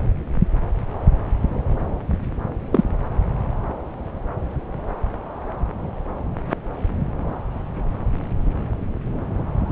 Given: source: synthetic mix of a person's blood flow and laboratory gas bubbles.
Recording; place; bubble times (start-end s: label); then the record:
Doppler ultrasound of blood flow; subclavian vein
2.72-2.84 s: bubbles
From the record:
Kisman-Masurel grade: 113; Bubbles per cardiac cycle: 1 to 2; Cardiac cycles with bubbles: 1 to 10%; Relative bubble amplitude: loud (0.450 to 0.775); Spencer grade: 1 (occasional bubble signal discernible with the cardiac motion signal, with majority of cardiac periods free of bubbles); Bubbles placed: anywhere in the cardiac cycle